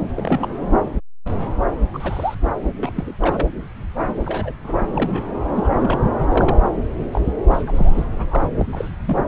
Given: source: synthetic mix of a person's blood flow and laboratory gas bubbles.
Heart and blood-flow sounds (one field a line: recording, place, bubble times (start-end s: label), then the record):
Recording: Doppler ultrasound of blood flow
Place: subclavian vein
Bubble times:
0.15-0.49 s: bubbles
1.93-2.34 s: bubbles
2.83-3.13 s: bubbles
3.22-3.47 s: bubbles
4.08-4.12 s: bubbles
4.24-4.54 s: bubbles
4.63-5.24 s: bubbles
5.46-5.49 s: bubbles
5.54-5.68 s: bubbles
5.80-6.03 s: bubbles
6.29-6.58 s: bubbles
7.13-7.21 s: bubbles
7.50-7.63 s: bubbles
7.67-8.06 s: bubbles
8.12-8.48 s: bubbles
8.58-8.65 s: bubbles
8.72-8.89 s: bubbles
9.05-9.25 s: bubbles
From the record:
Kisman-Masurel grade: 232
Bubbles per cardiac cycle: several, 3 to 8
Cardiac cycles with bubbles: 50 to 99%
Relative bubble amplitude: moderate (0.250 to 0.450)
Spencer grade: 3 (all of the cardiac periods contain showers or single bubble signals, but not dominating or overriding the cardiac motion signals)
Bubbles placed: anywhere in the cardiac cycle